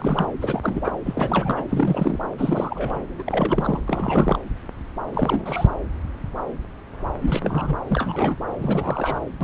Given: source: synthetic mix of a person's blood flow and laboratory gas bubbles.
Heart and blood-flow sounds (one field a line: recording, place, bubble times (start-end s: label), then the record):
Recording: Doppler ultrasound of blood flow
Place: subclavian vein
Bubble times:
0.00-0.26 s: bubbles
0.41-0.81 s: bubbles
0.84-0.92 s: bubbles
1.05-1.65 s: bubbles
1.69-2.18 s: bubbles
2.38-3.00 s: bubbles
3.18-3.80 s: bubbles
3.88-4.38 s: bubbles
5.12-5.67 s: bubbles
7.22-7.75 s: bubbles
7.88-8.36 s: bubbles
8.59-9.20 s: bubbles
9.41-9.44 s: bubbles
From the record:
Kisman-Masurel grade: 332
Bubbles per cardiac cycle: rolling drumbeat, 9 or more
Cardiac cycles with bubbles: 50 to 99%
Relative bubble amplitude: moderate (0.250 to 0.450)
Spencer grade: 3 (all of the cardiac periods contain showers or single bubble signals, but not dominating or overriding the cardiac motion signals)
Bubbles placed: anywhere in the cardiac cycle